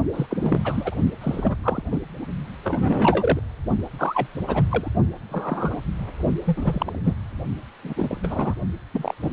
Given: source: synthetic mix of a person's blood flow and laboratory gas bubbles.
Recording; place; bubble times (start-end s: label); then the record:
Doppler ultrasound of blood flow; precordium
0.14-0.26 s: bubbles
0.30-0.36 s: bubbles
0.42-0.61 s: bubbles
0.64-0.94 s: bubbles
1.21-1.56 s: bubbles
1.63-1.82 s: bubbles
1.91-2.00 s: bubbles
2.63-3.39 s: bubbles
3.98-4.28 s: bubbles
4.47-4.63 s: bubbles
4.71-4.92 s: bubbles
5.25-5.81 s: bubbles
6.45-6.99 s: bubbles
7.04-7.13 s: bubbles
7.83-7.93 s: bubbles
7.96-8.17 s: bubbles
8.23-8.54 s: bubbles
8.94-9.14 s: bubbles
9.22-9.29 s: bubbles
From the record:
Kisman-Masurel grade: 232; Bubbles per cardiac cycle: several, 3 to 8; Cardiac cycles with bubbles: 50 to 99%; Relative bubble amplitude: moderate (0.250 to 0.450); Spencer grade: 3 (all of the cardiac periods contain showers or single bubble signals, but not dominating or overriding the cardiac motion signals); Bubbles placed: only in the low amplitude regions of the cardiac cycle